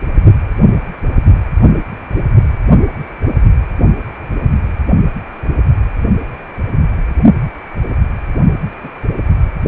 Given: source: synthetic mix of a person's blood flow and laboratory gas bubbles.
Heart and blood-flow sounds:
Doppler ultrasound of blood flow; precordium
8.82-8.90 s: bubbles
From the record:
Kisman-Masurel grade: 112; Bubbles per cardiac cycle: 1 to 2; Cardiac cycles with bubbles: 1 to 10%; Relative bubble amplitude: moderate (0.250 to 0.450); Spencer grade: 1 (occasional bubble signal discernible with the cardiac motion signal, with majority of cardiac periods free of bubbles); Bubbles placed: only in the low amplitude regions of the cardiac cycle

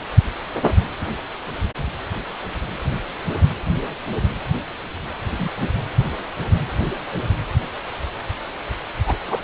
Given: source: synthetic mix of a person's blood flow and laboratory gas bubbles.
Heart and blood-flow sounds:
Doppler ultrasound of blood flow; precordium
5.31-5.67 s: bubbles
9.07-9.16 s: bubbles
9.28-9.42 s: bubbles
From the record:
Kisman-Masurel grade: 122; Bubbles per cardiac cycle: 1 to 2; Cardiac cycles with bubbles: 10 to 50%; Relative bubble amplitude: moderate (0.250 to 0.450); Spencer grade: 2 (many but less than half of the cardiac periods contain bubble signals, singularly or in groups); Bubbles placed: anywhere in the cardiac cycle

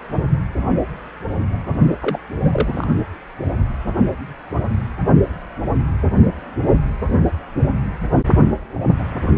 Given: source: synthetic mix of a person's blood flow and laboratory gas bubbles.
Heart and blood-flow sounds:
Doppler ultrasound of blood flow; precordium
2.00-2.19 s: bubbles
2.44-2.88 s: bubbles
From the record:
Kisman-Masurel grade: 212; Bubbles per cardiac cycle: several, 3 to 8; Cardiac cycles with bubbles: 1 to 10%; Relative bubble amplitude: moderate (0.250 to 0.450); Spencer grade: 1 (occasional bubble signal discernible with the cardiac motion signal, with majority of cardiac periods free of bubbles); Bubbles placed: only in the low amplitude regions of the cardiac cycle

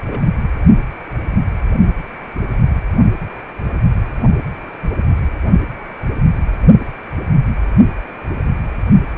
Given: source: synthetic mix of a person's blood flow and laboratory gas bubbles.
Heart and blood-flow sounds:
Doppler ultrasound of blood flow; precordium
0.06-0.21 s: bubbles
From the record:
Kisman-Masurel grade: 211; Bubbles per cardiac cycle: several, 3 to 8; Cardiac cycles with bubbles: 1 to 10%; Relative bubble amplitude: barely perceptible (0.100 to 0.250); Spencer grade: 1 (occasional bubble signal discernible with the cardiac motion signal, with majority of cardiac periods free of bubbles); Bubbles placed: only in the low amplitude regions of the cardiac cycle

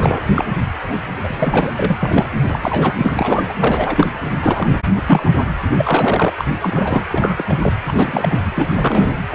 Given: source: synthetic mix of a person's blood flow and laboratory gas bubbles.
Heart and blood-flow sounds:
Doppler ultrasound of blood flow; precordium
0.00-0.45 s: bubbles
0.88-0.98 s: bubbles
1.24-1.71 s: bubbles
1.77-2.27 s: bubbles
2.35-2.94 s: bubbles
2.97-3.54 s: bubbles
3.59-4.07 s: bubbles
4.25-4.38 s: bubbles
4.42-4.67 s: bubbles
4.71-4.80 s: bubbles
4.93-5.03 s: bubbles
5.05-5.42 s: bubbles
5.72-6.32 s: bubbles
6.37-7.03 s: bubbles
7.11-7.44 s: bubbles
7.47-7.58 s: bubbles
7.61-7.74 s: bubbles
7.86-7.93 s: bubbles
7.95-8.40 s: bubbles
8.55-9.14 s: bubbles
9.31-9.34 s: bubbles
From the record:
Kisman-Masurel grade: 342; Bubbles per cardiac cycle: rolling drumbeat, 9 or more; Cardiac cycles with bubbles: 100%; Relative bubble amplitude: moderate (0.250 to 0.450); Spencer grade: 3 (all of the cardiac periods contain showers or single bubble signals, but not dominating or overriding the cardiac motion signals); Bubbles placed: anywhere in the cardiac cycle

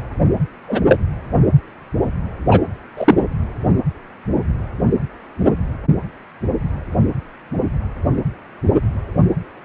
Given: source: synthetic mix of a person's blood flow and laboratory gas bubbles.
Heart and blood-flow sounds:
Doppler ultrasound of blood flow; precordium
0.68-0.81 s: bubbles
0.88-0.97 s: bubbles
2.50-2.61 s: bubbles
2.96-3.15 s: bubbles
From the record:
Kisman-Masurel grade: 123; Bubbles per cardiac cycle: 1 to 2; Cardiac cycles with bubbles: 10 to 50%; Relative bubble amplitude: loud (0.450 to 0.775); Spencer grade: 2 (many but less than half of the cardiac periods contain bubble signals, singularly or in groups); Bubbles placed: anywhere in the cardiac cycle

